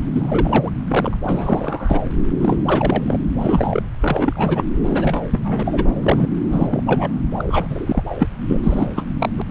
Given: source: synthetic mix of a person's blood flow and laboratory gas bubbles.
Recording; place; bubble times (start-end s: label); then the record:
Doppler ultrasound of blood flow; subclavian vein
0.13-0.71 s: bubbles
0.88-1.17 s: bubbles
1.23-1.99 s: bubbles
2.29-3.18 s: bubbles
3.35-3.82 s: bubbles
4.00-4.64 s: bubbles
4.86-5.92 s: bubbles
6.00-6.27 s: bubbles
6.50-6.81 s: bubbles
6.86-7.12 s: bubbles
7.38-8.03 s: bubbles
8.10-8.15 s: bubbles
8.19-8.28 s: bubbles
8.44-8.61 s: bubbles
8.63-8.87 s: bubbles
8.96-9.03 s: bubbles
9.20-9.29 s: bubbles
9.38-9.42 s: bubbles
From the record:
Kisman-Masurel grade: 342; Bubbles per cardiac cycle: rolling drumbeat, 9 or more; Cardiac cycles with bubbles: 100%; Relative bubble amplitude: moderate (0.250 to 0.450); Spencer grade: 3 (all of the cardiac periods contain showers or single bubble signals, but not dominating or overriding the cardiac motion signals); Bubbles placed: anywhere in the cardiac cycle